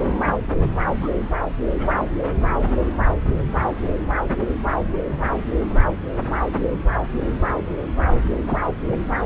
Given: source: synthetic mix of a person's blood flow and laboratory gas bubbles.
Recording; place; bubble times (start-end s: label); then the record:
Doppler ultrasound of blood flow; subclavian vein
1.01-1.08 s: bubbles
1.79-1.87 s: bubbles
8.47-8.59 s: bubbles
8.91-8.97 s: bubbles
From the record:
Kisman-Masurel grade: 121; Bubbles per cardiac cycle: 1 to 2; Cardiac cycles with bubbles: 10 to 50%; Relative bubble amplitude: barely perceptible (0.100 to 0.250); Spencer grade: 2 (many but less than half of the cardiac periods contain bubble signals, singularly or in groups); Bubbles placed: anywhere in the cardiac cycle